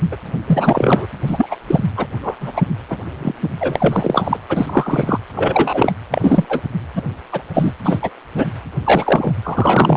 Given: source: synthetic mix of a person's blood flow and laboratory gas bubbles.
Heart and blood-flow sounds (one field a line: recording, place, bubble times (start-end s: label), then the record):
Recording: Doppler ultrasound of blood flow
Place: precordium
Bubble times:
0.11-0.17 s: bubbles
0.47-1.06 s: bubbles
1.26-1.55 s: bubbles
1.68-1.83 s: bubbles
1.97-2.06 s: bubbles
2.22-2.35 s: bubbles
2.40-2.62 s: bubbles
2.90-2.97 s: bubbles
3.19-3.35 s: bubbles
3.60-4.37 s: bubbles
4.49-5.18 s: bubbles
5.34-5.92 s: bubbles
6.11-6.45 s: bubbles
6.49-6.62 s: bubbles
6.95-7.02 s: bubbles
7.32-7.42 s: bubbles
7.54-7.73 s: bubbles
7.84-8.11 s: bubbles
8.37-8.46 s: bubbles
8.83-9.33 s: bubbles
9.42-9.97 s: bubbles
From the record:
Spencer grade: 3 (all of the cardiac periods contain showers or single bubble signals, but not dominating or overriding the cardiac motion signals)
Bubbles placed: anywhere in the cardiac cycle